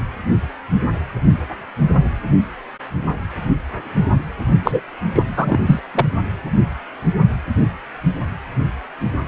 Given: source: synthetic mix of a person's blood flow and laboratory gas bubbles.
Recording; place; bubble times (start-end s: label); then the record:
Doppler ultrasound of blood flow; precordium
4.65-4.80 s: bubbles
5.14-5.23 s: bubbles
5.37-5.58 s: bubbles
5.66-5.79 s: bubbles
5.95-6.05 s: bubbles
From the record:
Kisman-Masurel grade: 213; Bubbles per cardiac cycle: several, 3 to 8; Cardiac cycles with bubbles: 1 to 10%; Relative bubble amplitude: loud (0.450 to 0.775); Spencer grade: 1 (occasional bubble signal discernible with the cardiac motion signal, with majority of cardiac periods free of bubbles); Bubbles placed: only in the low amplitude regions of the cardiac cycle